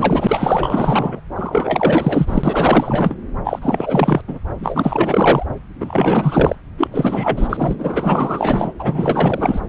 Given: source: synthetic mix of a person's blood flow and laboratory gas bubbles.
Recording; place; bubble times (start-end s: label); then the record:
Doppler ultrasound of blood flow; subclavian vein
0.00-1.20 s: bubbles
1.34-3.16 s: bubbles
3.44-3.59 s: bubbles
3.62-4.21 s: bubbles
4.28-4.38 s: bubbles
4.58-5.46 s: bubbles
5.80-6.56 s: bubbles
6.77-6.88 s: bubbles
6.91-7.75 s: bubbles
7.79-8.72 s: bubbles
8.79-9.60 s: bubbles
From the record:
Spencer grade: 4 (maximum detectable bubble signal sounding continuously throughout systole and diastole of every cardiac period, and overriding the amplitude of the normal cardiac signals); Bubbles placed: anywhere in the cardiac cycle